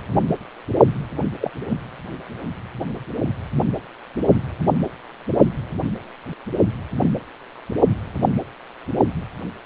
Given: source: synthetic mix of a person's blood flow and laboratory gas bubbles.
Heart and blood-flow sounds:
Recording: Doppler ultrasound of blood flow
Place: precordium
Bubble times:
1.41-1.51 s: bubbles
1.70-1.78 s: bubbles
6.99-7.10 s: bubbles
From the record:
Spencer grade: 2 (many but less than half of the cardiac periods contain bubble signals, singularly or in groups)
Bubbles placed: only in the low amplitude regions of the cardiac cycle

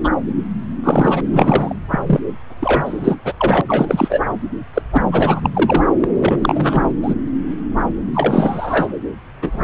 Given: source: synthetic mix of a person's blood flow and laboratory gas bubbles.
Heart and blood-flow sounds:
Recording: Doppler ultrasound of blood flow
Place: subclavian vein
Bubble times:
0.03-0.10 s: bubbles
0.82-1.21 s: bubbles
1.31-1.74 s: bubbles
1.92-1.99 s: bubbles
2.06-2.20 s: bubbles
2.60-3.15 s: bubbles
3.24-3.33 s: bubbles
3.37-3.61 s: bubbles
3.67-4.21 s: bubbles
4.73-4.82 s: bubbles
4.92-5.02 s: bubbles
5.12-5.50 s: bubbles
5.53-5.83 s: bubbles
6.00-6.08 s: bubbles
6.14-6.93 s: bubbles
7.02-7.14 s: bubbles
8.14-8.88 s: bubbles
9.42-9.64 s: bubbles
From the record:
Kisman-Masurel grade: 333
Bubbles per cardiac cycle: rolling drumbeat, 9 or more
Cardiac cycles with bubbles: 50 to 99%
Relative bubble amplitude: loud (0.450 to 0.775)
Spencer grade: 3 (all of the cardiac periods contain showers or single bubble signals, but not dominating or overriding the cardiac motion signals)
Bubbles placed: anywhere in the cardiac cycle

